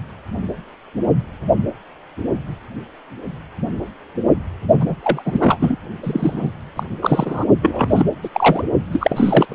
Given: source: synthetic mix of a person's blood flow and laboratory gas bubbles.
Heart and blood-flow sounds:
Doppler ultrasound of blood flow; precordium
4.80-4.96 s: bubbles
5.03-5.23 s: bubbles
5.25-5.77 s: bubbles
6.03-6.52 s: bubbles
6.75-6.83 s: bubbles
7.02-7.45 s: bubbles
7.62-8.06 s: bubbles
8.22-8.29 s: bubbles
8.33-8.63 s: bubbles
8.92-9.55 s: bubbles
From the record:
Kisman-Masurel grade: 333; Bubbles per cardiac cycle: rolling drumbeat, 9 or more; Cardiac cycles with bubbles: 50 to 99%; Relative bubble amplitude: loud (0.450 to 0.775); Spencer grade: 3 (all of the cardiac periods contain showers or single bubble signals, but not dominating or overriding the cardiac motion signals); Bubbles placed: only in the low amplitude regions of the cardiac cycle

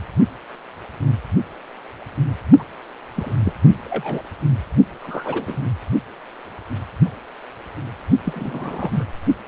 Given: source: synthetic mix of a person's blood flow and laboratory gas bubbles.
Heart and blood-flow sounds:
Doppler ultrasound of blood flow; precordium
2.59-2.64 s: bubbles
3.15-3.36 s: bubbles
3.45-3.53 s: bubbles
3.85-4.22 s: bubbles
5.02-5.70 s: bubbles
8.25-9.05 s: bubbles
From the record:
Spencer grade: 2 (many but less than half of the cardiac periods contain bubble signals, singularly or in groups); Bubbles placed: only in the low amplitude regions of the cardiac cycle

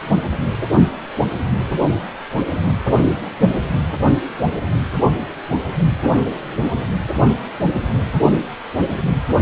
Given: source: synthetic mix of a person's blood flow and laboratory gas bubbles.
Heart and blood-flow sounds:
Doppler ultrasound of blood flow; precordium
no bubbles
From the record:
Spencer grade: 0 (complete lack of bubble signals)

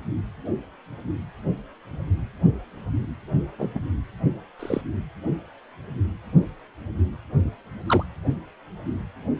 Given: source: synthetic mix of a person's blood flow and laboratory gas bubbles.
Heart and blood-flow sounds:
Doppler ultrasound of blood flow; precordium
3.58-3.69 s: bubbles
3.75-3.79 s: bubbles
4.59-4.81 s: bubbles
7.88-8.04 s: bubbles
From the record:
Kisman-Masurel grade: 122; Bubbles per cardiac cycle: 1 to 2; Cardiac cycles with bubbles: 10 to 50%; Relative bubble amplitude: moderate (0.250 to 0.450); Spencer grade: 2 (many but less than half of the cardiac periods contain bubble signals, singularly or in groups); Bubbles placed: only in the low amplitude regions of the cardiac cycle

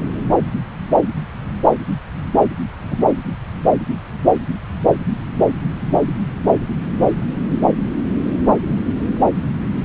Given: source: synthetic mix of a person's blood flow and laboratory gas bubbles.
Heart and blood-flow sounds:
Doppler ultrasound of blood flow; subclavian vein
2.90-3.05 s: bubbles
From the record:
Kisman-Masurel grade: 112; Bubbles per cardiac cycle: 1 to 2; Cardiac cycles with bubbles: 1 to 10%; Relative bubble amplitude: moderate (0.250 to 0.450); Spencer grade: 1 (occasional bubble signal discernible with the cardiac motion signal, with majority of cardiac periods free of bubbles); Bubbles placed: anywhere in the cardiac cycle

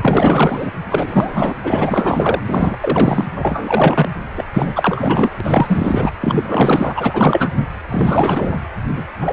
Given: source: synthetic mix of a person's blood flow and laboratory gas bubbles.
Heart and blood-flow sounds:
Doppler ultrasound of blood flow; precordium
0.01-0.71 s: bubbles
0.90-1.55 s: bubbles
1.64-2.42 s: bubbles
2.47-2.76 s: bubbles
2.80-3.25 s: bubbles
3.35-4.09 s: bubbles
4.37-4.44 s: bubbles
4.53-5.29 s: bubbles
5.40-6.10 s: bubbles
6.20-7.64 s: bubbles
7.88-8.60 s: bubbles
8.96-9.04 s: bubbles
9.20-9.33 s: bubbles
From the record:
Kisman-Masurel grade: 444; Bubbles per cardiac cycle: continuous sound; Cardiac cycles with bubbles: 100%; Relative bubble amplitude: maximal (0.775 to 0.999); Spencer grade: 4 (maximum detectable bubble signal sounding continuously throughout systole and diastole of every cardiac period, and overriding the amplitude of the normal cardiac signals); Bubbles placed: anywhere in the cardiac cycle

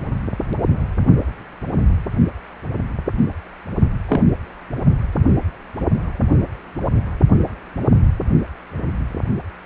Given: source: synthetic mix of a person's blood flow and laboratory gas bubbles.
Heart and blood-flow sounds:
Doppler ultrasound of blood flow; precordium
4.08-4.23 s: bubbles
From the record:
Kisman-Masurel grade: 122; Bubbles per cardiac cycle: 1 to 2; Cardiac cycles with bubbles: 10 to 50%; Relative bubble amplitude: moderate (0.250 to 0.450); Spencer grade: 2 (many but less than half of the cardiac periods contain bubble signals, singularly or in groups); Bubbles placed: only in the low amplitude regions of the cardiac cycle

